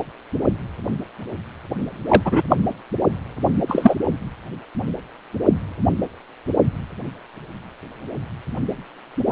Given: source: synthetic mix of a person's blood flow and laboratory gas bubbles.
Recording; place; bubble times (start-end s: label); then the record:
Doppler ultrasound of blood flow; precordium
2.08-2.21 s: bubbles
2.25-2.42 s: bubbles
2.50-2.55 s: bubbles
3.67-3.95 s: bubbles
From the record:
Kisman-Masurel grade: 223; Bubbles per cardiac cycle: several, 3 to 8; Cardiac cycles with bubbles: 10 to 50%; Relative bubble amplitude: loud (0.450 to 0.775); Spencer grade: 2 (many but less than half of the cardiac periods contain bubble signals, singularly or in groups); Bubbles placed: anywhere in the cardiac cycle